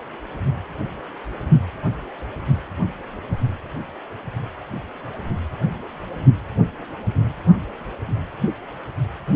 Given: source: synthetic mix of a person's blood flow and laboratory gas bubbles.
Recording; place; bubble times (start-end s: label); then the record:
Doppler ultrasound of blood flow; precordium
no bubbles
From the record:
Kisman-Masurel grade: 000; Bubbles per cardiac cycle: 0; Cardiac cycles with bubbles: 0%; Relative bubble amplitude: no bubbles discernible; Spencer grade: 0 (complete lack of bubble signals)